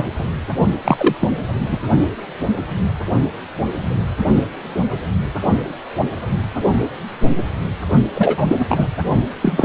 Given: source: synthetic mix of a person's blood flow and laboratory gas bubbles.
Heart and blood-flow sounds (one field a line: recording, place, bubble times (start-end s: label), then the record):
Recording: Doppler ultrasound of blood flow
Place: precordium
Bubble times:
0.00-0.07 s: bubbles
0.17-0.30 s: bubbles
0.84-1.16 s: bubbles
1.19-1.28 s: bubbles
1.71-1.78 s: bubbles
8.15-8.45 s: bubbles
8.47-8.65 s: bubbles
8.69-8.86 s: bubbles
9.42-9.65 s: bubbles
From the record:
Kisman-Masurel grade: 223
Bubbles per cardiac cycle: several, 3 to 8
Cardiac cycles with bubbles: 10 to 50%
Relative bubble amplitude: loud (0.450 to 0.775)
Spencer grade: 2 (many but less than half of the cardiac periods contain bubble signals, singularly or in groups)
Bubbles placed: only in the low amplitude regions of the cardiac cycle